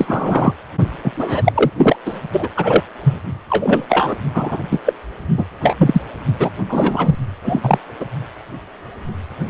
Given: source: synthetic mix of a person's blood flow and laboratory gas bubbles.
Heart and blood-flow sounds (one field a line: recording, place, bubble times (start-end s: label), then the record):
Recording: Doppler ultrasound of blood flow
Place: precordium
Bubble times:
0.00-0.53 s: bubbles
1.04-1.12 s: bubbles
1.17-1.71 s: bubbles
1.77-1.96 s: bubbles
2.06-2.21 s: bubbles
2.32-2.48 s: bubbles
2.56-2.83 s: bubbles
3.03-3.18 s: bubbles
3.50-4.16 s: bubbles
4.34-4.57 s: bubbles
4.71-4.79 s: bubbles
4.86-4.93 s: bubbles
5.38-5.45 s: bubbles
5.61-5.76 s: bubbles
5.79-6.01 s: bubbles
6.39-6.50 s: bubbles
6.68-7.16 s: bubbles
7.44-7.78 s: bubbles
8.00-8.05 s: bubbles
From the record:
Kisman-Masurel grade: 233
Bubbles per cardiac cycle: several, 3 to 8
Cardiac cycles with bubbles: 50 to 99%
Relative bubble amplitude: loud (0.450 to 0.775)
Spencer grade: 3 (all of the cardiac periods contain showers or single bubble signals, but not dominating or overriding the cardiac motion signals)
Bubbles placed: only in the low amplitude regions of the cardiac cycle